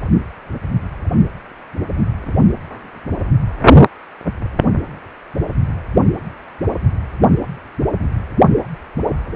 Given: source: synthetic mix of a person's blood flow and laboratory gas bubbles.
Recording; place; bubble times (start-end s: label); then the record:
Doppler ultrasound of blood flow; precordium
8.64-8.67 s: bubbles
From the record:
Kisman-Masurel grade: 111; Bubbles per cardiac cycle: 1 to 2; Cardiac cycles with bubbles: 1 to 10%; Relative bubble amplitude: barely perceptible (0.100 to 0.250); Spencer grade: 1 (occasional bubble signal discernible with the cardiac motion signal, with majority of cardiac periods free of bubbles); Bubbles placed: only in the low amplitude regions of the cardiac cycle